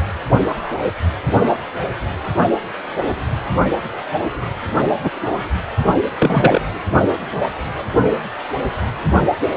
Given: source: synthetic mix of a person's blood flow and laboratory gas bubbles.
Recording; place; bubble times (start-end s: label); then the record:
Doppler ultrasound of blood flow; precordium
5.03-5.10 s: bubbles
6.18-6.61 s: bubbles
From the record:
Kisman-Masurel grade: 123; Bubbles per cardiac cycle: 1 to 2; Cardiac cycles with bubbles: 10 to 50%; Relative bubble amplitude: loud (0.450 to 0.775); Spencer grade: 2 (many but less than half of the cardiac periods contain bubble signals, singularly or in groups); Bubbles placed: only in the low amplitude regions of the cardiac cycle